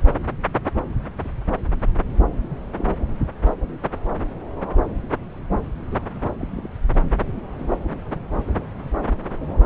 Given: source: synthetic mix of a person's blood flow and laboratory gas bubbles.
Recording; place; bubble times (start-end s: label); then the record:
Doppler ultrasound of blood flow; subclavian vein
0.62-0.71 s: bubbles
1.24-1.28 s: bubbles
2.49-2.59 s: bubbles
2.72-2.88 s: bubbles
5.91-5.96 s: bubbles
6.38-6.69 s: bubbles
7.59-7.80 s: bubbles
From the record:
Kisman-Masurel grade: 121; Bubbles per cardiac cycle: 1 to 2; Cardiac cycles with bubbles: 10 to 50%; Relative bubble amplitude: barely perceptible (0.100 to 0.250); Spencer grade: 2 (many but less than half of the cardiac periods contain bubble signals, singularly or in groups); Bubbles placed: anywhere in the cardiac cycle